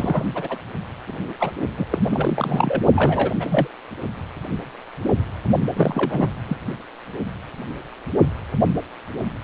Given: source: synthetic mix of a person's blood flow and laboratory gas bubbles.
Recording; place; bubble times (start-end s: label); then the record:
Doppler ultrasound of blood flow; precordium
0.00-0.25 s: bubbles
0.34-0.58 s: bubbles
1.07-1.33 s: bubbles
1.39-1.51 s: bubbles
1.77-1.86 s: bubbles
1.92-2.00 s: bubbles
2.11-2.82 s: bubbles
2.93-3.32 s: bubbles
3.40-3.67 s: bubbles
5.76-6.28 s: bubbles
6.48-6.56 s: bubbles
From the record:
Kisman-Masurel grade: 332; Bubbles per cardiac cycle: rolling drumbeat, 9 or more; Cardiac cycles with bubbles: 50 to 99%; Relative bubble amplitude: moderate (0.250 to 0.450); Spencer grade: 3 (all of the cardiac periods contain showers or single bubble signals, but not dominating or overriding the cardiac motion signals); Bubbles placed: only in the low amplitude regions of the cardiac cycle